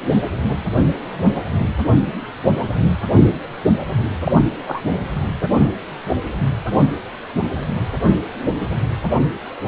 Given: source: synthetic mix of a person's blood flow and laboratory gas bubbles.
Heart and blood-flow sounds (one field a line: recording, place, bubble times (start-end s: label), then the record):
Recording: Doppler ultrasound of blood flow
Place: precordium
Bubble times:
4.25-4.32 s: bubbles
4.66-4.81 s: bubbles
From the record:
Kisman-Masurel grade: 123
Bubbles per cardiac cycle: 1 to 2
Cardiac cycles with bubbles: 10 to 50%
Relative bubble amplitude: loud (0.450 to 0.775)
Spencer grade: 2 (many but less than half of the cardiac periods contain bubble signals, singularly or in groups)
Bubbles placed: anywhere in the cardiac cycle